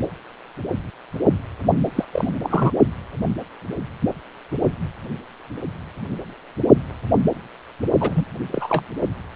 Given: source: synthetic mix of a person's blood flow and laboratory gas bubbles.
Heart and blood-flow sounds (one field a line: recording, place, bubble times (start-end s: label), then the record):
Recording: Doppler ultrasound of blood flow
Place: precordium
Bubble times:
1.95-2.05 s: bubbles
2.12-2.32 s: bubbles
2.43-2.71 s: bubbles
8.00-8.25 s: bubbles
8.51-8.85 s: bubbles
From the record:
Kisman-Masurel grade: 222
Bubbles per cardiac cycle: several, 3 to 8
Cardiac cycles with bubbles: 10 to 50%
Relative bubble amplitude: moderate (0.250 to 0.450)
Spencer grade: 2 (many but less than half of the cardiac periods contain bubble signals, singularly or in groups)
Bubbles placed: only in the low amplitude regions of the cardiac cycle